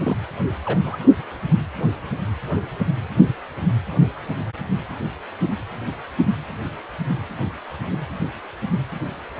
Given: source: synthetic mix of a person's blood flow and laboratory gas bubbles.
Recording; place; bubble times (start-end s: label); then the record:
Doppler ultrasound of blood flow; precordium
0.04-0.17 s: bubbles
0.65-0.80 s: bubbles
0.83-0.97 s: bubbles
From the record:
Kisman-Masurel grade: 211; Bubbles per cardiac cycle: several, 3 to 8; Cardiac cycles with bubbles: 1 to 10%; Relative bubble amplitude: barely perceptible (0.100 to 0.250); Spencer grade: 1 (occasional bubble signal discernible with the cardiac motion signal, with majority of cardiac periods free of bubbles); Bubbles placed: anywhere in the cardiac cycle